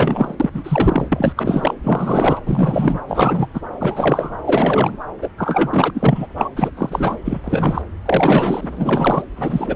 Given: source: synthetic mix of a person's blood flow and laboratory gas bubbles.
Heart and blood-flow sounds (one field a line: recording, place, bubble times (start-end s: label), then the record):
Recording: Doppler ultrasound of blood flow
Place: subclavian vein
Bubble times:
0.00-0.35 s: bubbles
0.39-0.49 s: bubbles
0.53-1.08 s: bubbles
1.12-1.33 s: bubbles
1.36-1.74 s: bubbles
1.83-2.41 s: bubbles
2.46-3.02 s: bubbles
3.08-3.46 s: bubbles
3.54-3.60 s: bubbles
3.80-4.38 s: bubbles
4.46-4.97 s: bubbles
5.21-5.29 s: bubbles
5.38-5.91 s: bubbles
5.94-6.26 s: bubbles
6.37-6.49 s: bubbles
6.56-6.71 s: bubbles
6.77-7.17 s: bubbles
7.25-7.40 s: bubbles
7.44-7.82 s: bubbles
8.05-9.24 s: bubbles
9.36-9.76 s: bubbles
From the record:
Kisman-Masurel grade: 343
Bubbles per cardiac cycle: rolling drumbeat, 9 or more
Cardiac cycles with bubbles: 100%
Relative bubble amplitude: loud (0.450 to 0.775)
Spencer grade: 3 (all of the cardiac periods contain showers or single bubble signals, but not dominating or overriding the cardiac motion signals)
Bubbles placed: anywhere in the cardiac cycle